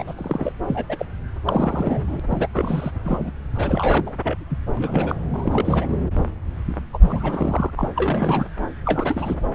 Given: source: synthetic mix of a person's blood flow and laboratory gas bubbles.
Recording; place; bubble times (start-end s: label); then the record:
Doppler ultrasound of blood flow; subclavian vein
0.00-0.04 s: bubbles
0.07-0.13 s: bubbles
0.18-0.53 s: bubbles
0.67-0.85 s: bubbles
0.89-0.96 s: bubbles
0.99-1.06 s: bubbles
1.46-2.20 s: bubbles
2.30-2.48 s: bubbles
2.54-2.91 s: bubbles
3.04-3.31 s: bubbles
3.54-4.14 s: bubbles
4.23-4.38 s: bubbles
4.49-4.57 s: bubbles
4.77-5.15 s: bubbles
5.33-5.97 s: bubbles
6.93-6.98 s: bubbles
7.01-7.71 s: bubbles
7.76-7.88 s: bubbles
7.96-8.47 s: bubbles
8.85-9.46 s: bubbles
From the record:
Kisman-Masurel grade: 332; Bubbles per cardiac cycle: rolling drumbeat, 9 or more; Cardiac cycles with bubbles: 50 to 99%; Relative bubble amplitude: moderate (0.250 to 0.450); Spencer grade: 3 (all of the cardiac periods contain showers or single bubble signals, but not dominating or overriding the cardiac motion signals); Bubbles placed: anywhere in the cardiac cycle